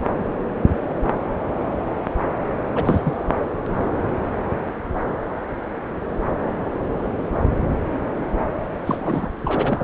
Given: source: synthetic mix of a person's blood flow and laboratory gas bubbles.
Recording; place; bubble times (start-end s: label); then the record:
Doppler ultrasound of blood flow; subclavian vein
2.75-3.12 s: bubbles
8.86-9.30 s: bubbles
9.45-9.84 s: bubbles
From the record:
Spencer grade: 2 (many but less than half of the cardiac periods contain bubble signals, singularly or in groups); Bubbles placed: anywhere in the cardiac cycle